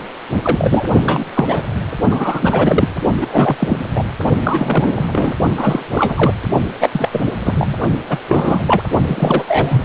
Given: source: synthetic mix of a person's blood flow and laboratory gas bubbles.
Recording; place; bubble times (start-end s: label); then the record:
Doppler ultrasound of blood flow; precordium
0.43-0.84 s: bubbles
1.03-1.24 s: bubbles
1.34-1.63 s: bubbles
2.10-2.88 s: bubbles
3.21-3.84 s: bubbles
3.94-4.03 s: bubbles
4.43-5.34 s: bubbles
5.58-5.83 s: bubbles
5.91-6.33 s: bubbles
6.80-6.89 s: bubbles
6.93-7.09 s: bubbles
7.12-7.25 s: bubbles
7.44-7.76 s: bubbles
8.09-8.18 s: bubbles
8.28-8.82 s: bubbles
9.07-9.45 s: bubbles
9.48-9.83 s: bubbles
From the record:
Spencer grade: 3 (all of the cardiac periods contain showers or single bubble signals, but not dominating or overriding the cardiac motion signals); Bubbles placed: only in the low amplitude regions of the cardiac cycle